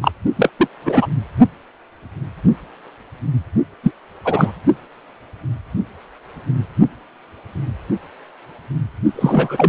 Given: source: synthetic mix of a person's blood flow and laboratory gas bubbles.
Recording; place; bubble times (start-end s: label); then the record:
Doppler ultrasound of blood flow; precordium
0.01-0.12 s: bubbles
0.36-0.50 s: bubbles
0.58-0.67 s: bubbles
0.85-1.06 s: bubbles
3.83-3.91 s: bubbles
4.25-4.53 s: bubbles
9.13-9.69 s: bubbles
From the record:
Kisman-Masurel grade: 223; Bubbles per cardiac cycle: several, 3 to 8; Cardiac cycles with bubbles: 10 to 50%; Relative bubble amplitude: loud (0.450 to 0.775); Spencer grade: 2 (many but less than half of the cardiac periods contain bubble signals, singularly or in groups); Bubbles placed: only in the low amplitude regions of the cardiac cycle